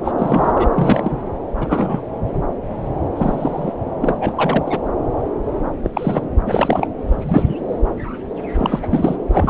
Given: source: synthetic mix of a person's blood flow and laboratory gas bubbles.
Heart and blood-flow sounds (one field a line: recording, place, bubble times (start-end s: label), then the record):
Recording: Doppler ultrasound of blood flow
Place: subclavian vein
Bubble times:
0.04-0.12 s: bubbles
0.18-0.52 s: bubbles
0.54-0.70 s: bubbles
0.74-1.22 s: bubbles
1.59-2.02 s: bubbles
3.15-3.73 s: bubbles
4.01-4.80 s: bubbles
5.83-5.90 s: bubbles
5.94-6.28 s: bubbles
6.46-6.88 s: bubbles
7.08-7.55 s: bubbles
8.59-9.17 s: bubbles
9.29-9.50 s: bubbles
From the record:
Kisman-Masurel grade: 233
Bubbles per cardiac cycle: several, 3 to 8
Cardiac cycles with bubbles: 50 to 99%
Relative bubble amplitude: loud (0.450 to 0.775)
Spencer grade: 3 (all of the cardiac periods contain showers or single bubble signals, but not dominating or overriding the cardiac motion signals)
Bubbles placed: anywhere in the cardiac cycle